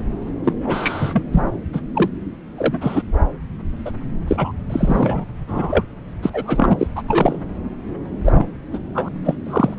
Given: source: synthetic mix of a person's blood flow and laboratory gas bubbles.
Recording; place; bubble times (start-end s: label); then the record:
Doppler ultrasound of blood flow; subclavian vein
0.43-0.53 s: bubbles
0.61-1.23 s: bubbles
1.32-1.44 s: bubbles
1.73-1.81 s: bubbles
1.94-2.09 s: bubbles
2.57-3.02 s: bubbles
3.85-3.92 s: bubbles
4.28-4.51 s: bubbles
4.70-5.25 s: bubbles
5.47-5.85 s: bubbles
6.22-6.30 s: bubbles
6.33-6.87 s: bubbles
6.96-7.03 s: bubbles
7.08-7.38 s: bubbles
8.24-8.46 s: bubbles
8.73-8.79 s: bubbles
8.94-9.08 s: bubbles
9.24-9.35 s: bubbles
9.46-9.79 s: bubbles
From the record:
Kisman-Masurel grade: 243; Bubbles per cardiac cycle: several, 3 to 8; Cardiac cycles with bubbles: 100%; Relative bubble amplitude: loud (0.450 to 0.775); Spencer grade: 3 (all of the cardiac periods contain showers or single bubble signals, but not dominating or overriding the cardiac motion signals); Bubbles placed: anywhere in the cardiac cycle